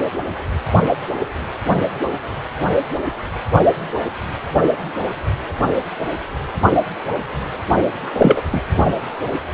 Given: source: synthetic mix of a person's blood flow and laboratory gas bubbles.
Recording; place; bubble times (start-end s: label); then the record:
Doppler ultrasound of blood flow; precordium
8.18-8.42 s: bubbles
8.52-8.61 s: bubbles
From the record:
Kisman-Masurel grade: 223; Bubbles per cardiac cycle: several, 3 to 8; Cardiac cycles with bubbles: 10 to 50%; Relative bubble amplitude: loud (0.450 to 0.775); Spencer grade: 2 (many but less than half of the cardiac periods contain bubble signals, singularly or in groups); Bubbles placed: only in the low amplitude regions of the cardiac cycle